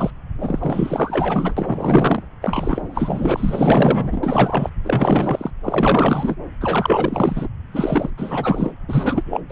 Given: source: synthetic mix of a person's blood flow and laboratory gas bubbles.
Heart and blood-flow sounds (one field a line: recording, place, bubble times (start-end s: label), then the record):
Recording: Doppler ultrasound of blood flow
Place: subclavian vein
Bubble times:
0.00-0.11 s: bubbles
0.38-1.54 s: bubbles
1.57-2.23 s: bubbles
2.42-4.70 s: bubbles
4.83-5.50 s: bubbles
5.63-6.35 s: bubbles
6.60-7.48 s: bubbles
7.73-8.11 s: bubbles
8.17-8.72 s: bubbles
8.88-9.40 s: bubbles
9.49-9.52 s: bubbles
From the record:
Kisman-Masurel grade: 444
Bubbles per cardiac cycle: continuous sound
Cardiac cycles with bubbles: 100%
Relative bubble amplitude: maximal (0.775 to 0.999)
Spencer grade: 4 (maximum detectable bubble signal sounding continuously throughout systole and diastole of every cardiac period, and overriding the amplitude of the normal cardiac signals)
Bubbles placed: anywhere in the cardiac cycle